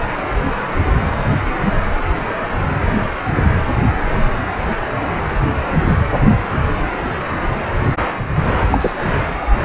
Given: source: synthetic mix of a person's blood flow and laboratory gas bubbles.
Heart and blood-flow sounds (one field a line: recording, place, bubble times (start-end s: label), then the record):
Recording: Doppler ultrasound of blood flow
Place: precordium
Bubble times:
8.70-8.94 s: bubbles
From the record:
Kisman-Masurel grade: 123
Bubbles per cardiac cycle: 1 to 2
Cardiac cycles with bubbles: 10 to 50%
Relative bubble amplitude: loud (0.450 to 0.775)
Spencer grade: 2 (many but less than half of the cardiac periods contain bubble signals, singularly or in groups)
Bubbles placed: anywhere in the cardiac cycle